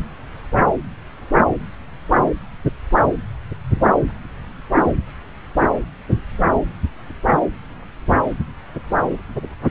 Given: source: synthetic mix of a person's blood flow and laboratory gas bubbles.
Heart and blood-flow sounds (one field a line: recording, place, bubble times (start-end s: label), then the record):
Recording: Doppler ultrasound of blood flow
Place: subclavian vein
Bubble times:
no bubbles
From the record:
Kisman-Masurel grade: 000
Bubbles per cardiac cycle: 0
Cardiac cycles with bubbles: 0%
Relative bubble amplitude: no bubbles discernible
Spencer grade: 0 (complete lack of bubble signals)